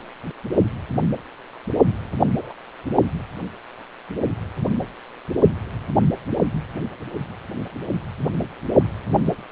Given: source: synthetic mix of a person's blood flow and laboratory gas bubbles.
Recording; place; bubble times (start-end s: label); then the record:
Doppler ultrasound of blood flow; precordium
2.38-2.53 s: bubbles
From the record:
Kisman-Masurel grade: 121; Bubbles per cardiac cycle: 1 to 2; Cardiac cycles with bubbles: 10 to 50%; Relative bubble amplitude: barely perceptible (0.100 to 0.250); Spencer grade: 2 (many but less than half of the cardiac periods contain bubble signals, singularly or in groups); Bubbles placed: only in the low amplitude regions of the cardiac cycle